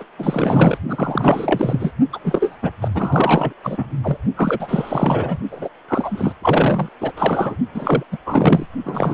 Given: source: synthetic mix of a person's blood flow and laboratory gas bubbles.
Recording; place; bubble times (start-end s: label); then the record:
Doppler ultrasound of blood flow; precordium
0.00-0.03 s: bubbles
0.18-0.78 s: bubbles
0.88-1.92 s: bubbles
2.12-2.19 s: bubbles
2.23-2.57 s: bubbles
2.62-2.70 s: bubbles
2.81-2.89 s: bubbles
2.94-3.53 s: bubbles
3.63-3.89 s: bubbles
4.02-4.17 s: bubbles
4.36-5.39 s: bubbles
5.50-5.68 s: bubbles
5.88-6.33 s: bubbles
6.42-6.89 s: bubbles
7.00-7.12 s: bubbles
7.16-7.56 s: bubbles
7.75-8.03 s: bubbles
8.12-8.17 s: bubbles
8.26-8.66 s: bubbles
8.84-9.13 s: bubbles
From the record:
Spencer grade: 4 (maximum detectable bubble signal sounding continuously throughout systole and diastole of every cardiac period, and overriding the amplitude of the normal cardiac signals); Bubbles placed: only in the low amplitude regions of the cardiac cycle